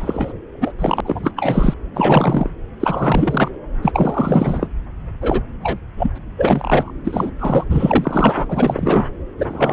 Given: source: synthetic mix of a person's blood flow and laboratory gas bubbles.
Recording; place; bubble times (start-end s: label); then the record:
Doppler ultrasound of blood flow; subclavian vein
0.00-0.33 s: bubbles
0.61-0.72 s: bubbles
0.79-1.01 s: bubbles
1.05-1.31 s: bubbles
1.36-1.74 s: bubbles
1.94-2.50 s: bubbles
2.79-3.52 s: bubbles
3.82-4.67 s: bubbles
5.21-5.42 s: bubbles
5.62-5.80 s: bubbles
5.97-6.10 s: bubbles
6.15-6.18 s: bubbles
6.37-6.92 s: bubbles
7.04-7.30 s: bubbles
7.39-7.64 s: bubbles
7.69-9.08 s: bubbles
9.38-9.73 s: bubbles
From the record:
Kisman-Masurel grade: 343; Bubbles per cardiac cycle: rolling drumbeat, 9 or more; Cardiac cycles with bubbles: 100%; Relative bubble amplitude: loud (0.450 to 0.775); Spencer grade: 3 (all of the cardiac periods contain showers or single bubble signals, but not dominating or overriding the cardiac motion signals); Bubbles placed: anywhere in the cardiac cycle